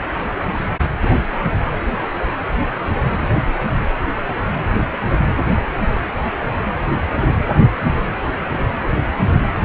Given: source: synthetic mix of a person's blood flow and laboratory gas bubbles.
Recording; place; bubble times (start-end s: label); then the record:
Doppler ultrasound of blood flow; precordium
no bubbles
From the record:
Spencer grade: 0 (complete lack of bubble signals)